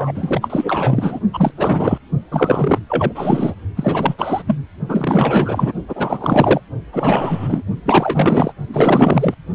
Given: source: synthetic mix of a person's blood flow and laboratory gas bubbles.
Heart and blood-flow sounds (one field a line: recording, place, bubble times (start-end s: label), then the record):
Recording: Doppler ultrasound of blood flow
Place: precordium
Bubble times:
0.00-1.20 s: bubbles
1.33-1.51 s: bubbles
1.57-1.98 s: bubbles
2.31-2.79 s: bubbles
2.89-3.55 s: bubbles
3.76-4.15 s: bubbles
4.17-4.42 s: bubbles
4.47-4.57 s: bubbles
4.88-5.72 s: bubbles
5.88-6.60 s: bubbles
6.92-7.62 s: bubbles
7.85-8.54 s: bubbles
8.73-9.35 s: bubbles
From the record:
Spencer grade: 4 (maximum detectable bubble signal sounding continuously throughout systole and diastole of every cardiac period, and overriding the amplitude of the normal cardiac signals)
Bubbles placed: only in the low amplitude regions of the cardiac cycle